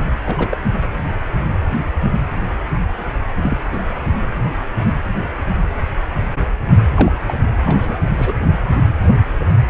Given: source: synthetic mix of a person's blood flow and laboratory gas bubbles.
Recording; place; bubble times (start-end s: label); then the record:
Doppler ultrasound of blood flow; precordium
0.25-0.57 s: bubbles
3.42-3.58 s: bubbles
3.72-3.82 s: bubbles
6.95-7.12 s: bubbles
7.26-7.34 s: bubbles
7.65-8.00 s: bubbles
8.18-8.35 s: bubbles
From the record:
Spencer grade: 2 (many but less than half of the cardiac periods contain bubble signals, singularly or in groups); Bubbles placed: anywhere in the cardiac cycle